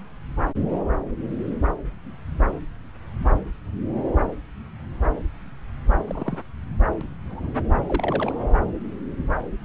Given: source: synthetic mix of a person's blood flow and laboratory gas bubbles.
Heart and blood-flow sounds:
Doppler ultrasound of blood flow; subclavian vein
0.43-0.52 s: bubbles
6.06-6.38 s: bubbles
7.01-7.05 s: bubbles
7.29-7.51 s: bubbles
7.87-8.32 s: bubbles
From the record:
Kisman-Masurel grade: 121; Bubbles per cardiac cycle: 1 to 2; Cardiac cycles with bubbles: 10 to 50%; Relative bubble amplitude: barely perceptible (0.100 to 0.250); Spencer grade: 2 (many but less than half of the cardiac periods contain bubble signals, singularly or in groups); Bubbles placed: anywhere in the cardiac cycle

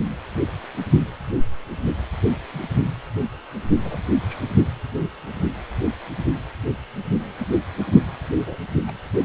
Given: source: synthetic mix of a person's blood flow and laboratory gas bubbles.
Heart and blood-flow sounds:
Doppler ultrasound of blood flow; precordium
2.53-2.67 s: bubbles
3.83-3.98 s: bubbles
4.21-4.51 s: bubbles
7.39-7.46 s: bubbles
8.46-8.56 s: bubbles
8.87-8.92 s: bubbles
From the record:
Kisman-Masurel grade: 121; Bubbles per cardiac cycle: 1 to 2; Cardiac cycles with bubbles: 10 to 50%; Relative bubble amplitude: barely perceptible (0.100 to 0.250); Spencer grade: 2 (many but less than half of the cardiac periods contain bubble signals, singularly or in groups); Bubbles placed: only in the low amplitude regions of the cardiac cycle

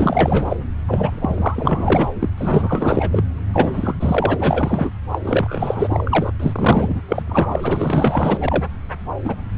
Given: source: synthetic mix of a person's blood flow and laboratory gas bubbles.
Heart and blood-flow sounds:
Doppler ultrasound of blood flow; subclavian vein
0.00-0.56 s: bubbles
0.87-2.12 s: bubbles
2.19-2.29 s: bubbles
2.38-3.25 s: bubbles
3.53-3.95 s: bubbles
3.99-4.92 s: bubbles
5.11-5.19 s: bubbles
5.24-6.32 s: bubbles
6.40-7.01 s: bubbles
7.08-7.23 s: bubbles
7.27-8.38 s: bubbles
8.41-8.63 s: bubbles
9.24-9.36 s: bubbles
From the record:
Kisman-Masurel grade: 444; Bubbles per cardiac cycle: continuous sound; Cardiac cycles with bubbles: 100%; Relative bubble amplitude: maximal (0.775 to 0.999); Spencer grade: 4 (maximum detectable bubble signal sounding continuously throughout systole and diastole of every cardiac period, and overriding the amplitude of the normal cardiac signals); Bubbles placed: anywhere in the cardiac cycle

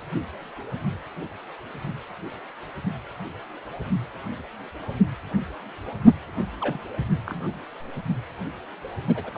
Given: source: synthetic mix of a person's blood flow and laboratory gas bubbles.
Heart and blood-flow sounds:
Doppler ultrasound of blood flow; precordium
6.61-6.80 s: bubbles
7.26-7.60 s: bubbles
9.07-9.31 s: bubbles
9.33-9.38 s: bubbles
From the record:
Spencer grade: 2 (many but less than half of the cardiac periods contain bubble signals, singularly or in groups); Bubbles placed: only in the low amplitude regions of the cardiac cycle

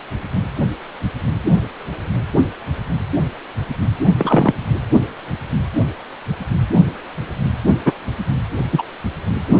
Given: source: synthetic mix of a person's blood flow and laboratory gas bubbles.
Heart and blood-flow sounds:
Doppler ultrasound of blood flow; precordium
4.17-4.53 s: bubbles
7.85-7.92 s: bubbles
8.71-8.84 s: bubbles
From the record:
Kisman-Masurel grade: 123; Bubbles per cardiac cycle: 1 to 2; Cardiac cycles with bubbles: 10 to 50%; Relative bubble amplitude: loud (0.450 to 0.775); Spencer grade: 2 (many but less than half of the cardiac periods contain bubble signals, singularly or in groups); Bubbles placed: only in the low amplitude regions of the cardiac cycle

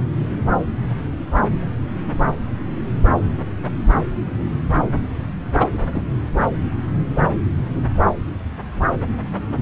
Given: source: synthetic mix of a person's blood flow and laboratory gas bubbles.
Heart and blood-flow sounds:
Doppler ultrasound of blood flow; subclavian vein
5.59-5.67 s: bubbles
5.93-6.01 s: bubbles
From the record:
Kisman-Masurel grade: 113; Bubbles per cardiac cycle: 1 to 2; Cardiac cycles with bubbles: 1 to 10%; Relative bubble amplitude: loud (0.450 to 0.775); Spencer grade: 1 (occasional bubble signal discernible with the cardiac motion signal, with majority of cardiac periods free of bubbles); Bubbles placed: anywhere in the cardiac cycle

